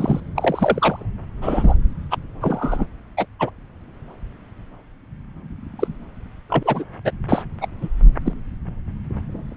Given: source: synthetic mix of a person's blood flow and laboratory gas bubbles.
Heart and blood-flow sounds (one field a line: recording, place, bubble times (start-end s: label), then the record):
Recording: Doppler ultrasound of blood flow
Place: subclavian vein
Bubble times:
0.00-0.20 s: bubbles
0.36-1.04 s: bubbles
1.41-1.74 s: bubbles
2.11-2.17 s: bubbles
2.41-2.85 s: bubbles
3.17-3.26 s: bubbles
3.39-3.50 s: bubbles
5.79-5.88 s: bubbles
6.49-6.85 s: bubbles
7.04-7.12 s: bubbles
7.29-7.42 s: bubbles
7.61-7.67 s: bubbles
7.80-7.88 s: bubbles
8.25-8.32 s: bubbles
From the record:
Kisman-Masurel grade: 232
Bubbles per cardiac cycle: several, 3 to 8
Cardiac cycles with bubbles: 50 to 99%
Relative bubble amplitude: moderate (0.250 to 0.450)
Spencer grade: 3 (all of the cardiac periods contain showers or single bubble signals, but not dominating or overriding the cardiac motion signals)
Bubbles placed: anywhere in the cardiac cycle